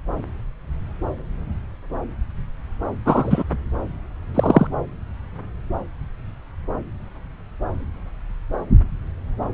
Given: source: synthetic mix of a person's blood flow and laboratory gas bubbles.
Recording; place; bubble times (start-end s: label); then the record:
Doppler ultrasound of blood flow; subclavian vein
3.05-3.43 s: bubbles
4.34-4.67 s: bubbles
From the record:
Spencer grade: 1 (occasional bubble signal discernible with the cardiac motion signal, with majority of cardiac periods free of bubbles); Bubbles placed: anywhere in the cardiac cycle